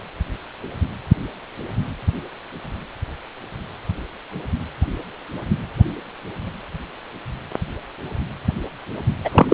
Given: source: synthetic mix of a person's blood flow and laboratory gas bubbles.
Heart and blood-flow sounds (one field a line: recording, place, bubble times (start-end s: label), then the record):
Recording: Doppler ultrasound of blood flow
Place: precordium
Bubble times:
9.25-9.29 s: bubbles
9.31-9.54 s: bubbles
From the record:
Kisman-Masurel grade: 213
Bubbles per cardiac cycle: several, 3 to 8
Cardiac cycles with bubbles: 1 to 10%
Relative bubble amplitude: loud (0.450 to 0.775)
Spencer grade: 1 (occasional bubble signal discernible with the cardiac motion signal, with majority of cardiac periods free of bubbles)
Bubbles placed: anywhere in the cardiac cycle